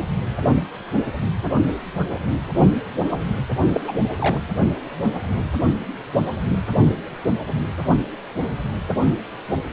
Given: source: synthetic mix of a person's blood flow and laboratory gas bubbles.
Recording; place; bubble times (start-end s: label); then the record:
Doppler ultrasound of blood flow; precordium
3.10-3.17 s: bubbles
3.73-3.81 s: bubbles
3.88-3.92 s: bubbles
4.18-4.38 s: bubbles
From the record:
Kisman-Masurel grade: 212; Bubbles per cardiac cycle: several, 3 to 8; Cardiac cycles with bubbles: 1 to 10%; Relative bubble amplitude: moderate (0.250 to 0.450); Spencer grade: 1 (occasional bubble signal discernible with the cardiac motion signal, with majority of cardiac periods free of bubbles); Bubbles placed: only in the low amplitude regions of the cardiac cycle